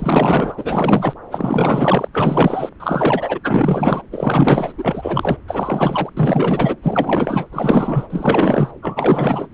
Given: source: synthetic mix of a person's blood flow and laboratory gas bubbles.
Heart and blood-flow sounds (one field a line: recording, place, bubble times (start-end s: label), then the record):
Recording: Doppler ultrasound of blood flow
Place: subclavian vein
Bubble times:
0.00-1.16 s: bubbles
1.30-2.08 s: bubbles
2.13-2.70 s: bubbles
2.80-3.38 s: bubbles
3.43-4.02 s: bubbles
4.12-4.72 s: bubbles
4.77-5.38 s: bubbles
5.47-6.09 s: bubbles
6.17-6.76 s: bubbles
6.83-7.46 s: bubbles
7.51-8.07 s: bubbles
8.10-8.71 s: bubbles
8.82-9.48 s: bubbles
From the record:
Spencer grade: 4 (maximum detectable bubble signal sounding continuously throughout systole and diastole of every cardiac period, and overriding the amplitude of the normal cardiac signals)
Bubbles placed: anywhere in the cardiac cycle